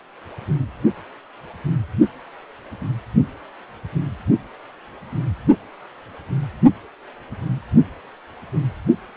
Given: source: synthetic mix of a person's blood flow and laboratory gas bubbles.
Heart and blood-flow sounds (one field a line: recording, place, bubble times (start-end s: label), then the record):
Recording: Doppler ultrasound of blood flow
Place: precordium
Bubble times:
2.81-2.85 s: bubbles
From the record:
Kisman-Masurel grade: 111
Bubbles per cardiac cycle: 1 to 2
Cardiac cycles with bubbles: 1 to 10%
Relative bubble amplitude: barely perceptible (0.100 to 0.250)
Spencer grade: 1 (occasional bubble signal discernible with the cardiac motion signal, with majority of cardiac periods free of bubbles)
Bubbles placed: only in the low amplitude regions of the cardiac cycle